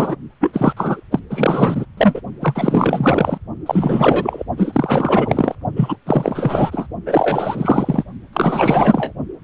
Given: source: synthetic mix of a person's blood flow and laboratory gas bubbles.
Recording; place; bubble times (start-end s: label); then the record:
Doppler ultrasound of blood flow; precordium
0.00-0.15 s: bubbles
0.40-0.73 s: bubbles
0.76-1.01 s: bubbles
1.11-1.19 s: bubbles
1.30-1.85 s: bubbles
1.97-2.21 s: bubbles
2.41-3.38 s: bubbles
3.66-4.43 s: bubbles
4.56-5.55 s: bubbles
5.76-5.96 s: bubbles
6.05-6.87 s: bubbles
7.06-8.04 s: bubbles
8.33-9.12 s: bubbles
From the record:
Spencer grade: 4 (maximum detectable bubble signal sounding continuously throughout systole and diastole of every cardiac period, and overriding the amplitude of the normal cardiac signals); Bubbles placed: only in the low amplitude regions of the cardiac cycle